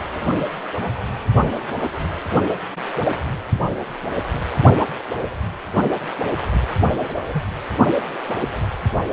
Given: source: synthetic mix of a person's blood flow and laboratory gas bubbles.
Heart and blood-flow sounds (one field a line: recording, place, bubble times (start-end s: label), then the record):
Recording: Doppler ultrasound of blood flow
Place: precordium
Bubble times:
7.02-7.20 s: bubbles
7.33-7.43 s: bubbles
From the record:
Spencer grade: 2 (many but less than half of the cardiac periods contain bubble signals, singularly or in groups)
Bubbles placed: anywhere in the cardiac cycle